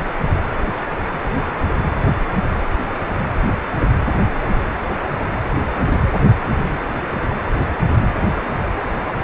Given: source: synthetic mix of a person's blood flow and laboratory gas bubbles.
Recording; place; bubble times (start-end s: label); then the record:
Doppler ultrasound of blood flow; precordium
no bubbles
From the record:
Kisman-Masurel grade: 000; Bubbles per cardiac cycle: 0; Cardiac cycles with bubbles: 0%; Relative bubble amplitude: no bubbles discernible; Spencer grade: 0 (complete lack of bubble signals)